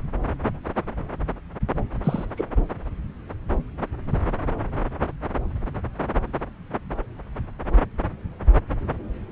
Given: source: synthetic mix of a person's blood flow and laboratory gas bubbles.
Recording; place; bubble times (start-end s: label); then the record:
Doppler ultrasound of blood flow; subclavian vein
2.04-2.25 s: bubbles
2.37-2.44 s: bubbles
From the record:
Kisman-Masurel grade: 112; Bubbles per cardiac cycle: 1 to 2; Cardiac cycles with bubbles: 1 to 10%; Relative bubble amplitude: moderate (0.250 to 0.450); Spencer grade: 1 (occasional bubble signal discernible with the cardiac motion signal, with majority of cardiac periods free of bubbles); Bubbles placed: anywhere in the cardiac cycle